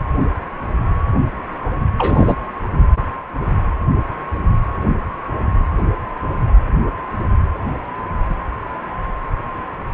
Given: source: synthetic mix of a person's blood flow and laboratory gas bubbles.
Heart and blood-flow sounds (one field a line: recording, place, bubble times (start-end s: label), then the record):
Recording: Doppler ultrasound of blood flow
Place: precordium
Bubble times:
1.98-2.36 s: bubbles
From the record:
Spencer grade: 1 (occasional bubble signal discernible with the cardiac motion signal, with majority of cardiac periods free of bubbles)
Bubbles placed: anywhere in the cardiac cycle